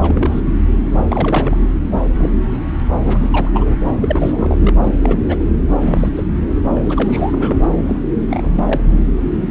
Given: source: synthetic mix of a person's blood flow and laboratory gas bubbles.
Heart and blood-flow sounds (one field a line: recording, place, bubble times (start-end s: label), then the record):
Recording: Doppler ultrasound of blood flow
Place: subclavian vein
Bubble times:
0.01-0.41 s: bubbles
1.08-1.56 s: bubbles
2.19-2.29 s: bubbles
3.04-3.29 s: bubbles
3.33-3.48 s: bubbles
3.53-3.76 s: bubbles
4.00-4.73 s: bubbles
4.83-4.94 s: bubbles
5.01-5.18 s: bubbles
5.28-5.36 s: bubbles
5.80-6.09 s: bubbles
6.16-6.26 s: bubbles
6.74-7.64 s: bubbles
7.87-8.00 s: bubbles
8.28-8.95 s: bubbles
From the record:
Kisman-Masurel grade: 232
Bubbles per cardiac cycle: several, 3 to 8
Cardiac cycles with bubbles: 50 to 99%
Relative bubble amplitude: moderate (0.250 to 0.450)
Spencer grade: 3 (all of the cardiac periods contain showers or single bubble signals, but not dominating or overriding the cardiac motion signals)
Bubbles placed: anywhere in the cardiac cycle